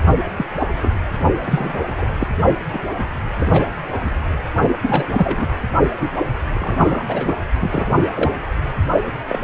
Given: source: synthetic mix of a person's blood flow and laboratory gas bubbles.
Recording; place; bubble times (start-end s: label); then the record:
Doppler ultrasound of blood flow; precordium
0.36-0.45 s: bubbles
0.59-0.67 s: bubbles
0.82-0.99 s: bubbles
1.45-2.16 s: bubbles
2.20-2.28 s: bubbles
2.73-2.79 s: bubbles
3.36-3.66 s: bubbles
4.05-4.11 s: bubbles
4.83-5.06 s: bubbles
5.12-5.55 s: bubbles
6.00-6.09 s: bubbles
6.55-7.37 s: bubbles
7.59-7.89 s: bubbles
8.15-8.31 s: bubbles
9.28-9.40 s: bubbles
From the record:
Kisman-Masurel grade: 242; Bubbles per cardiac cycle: several, 3 to 8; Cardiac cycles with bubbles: 100%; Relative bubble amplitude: moderate (0.250 to 0.450); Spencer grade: 3 (all of the cardiac periods contain showers or single bubble signals, but not dominating or overriding the cardiac motion signals); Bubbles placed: only in the low amplitude regions of the cardiac cycle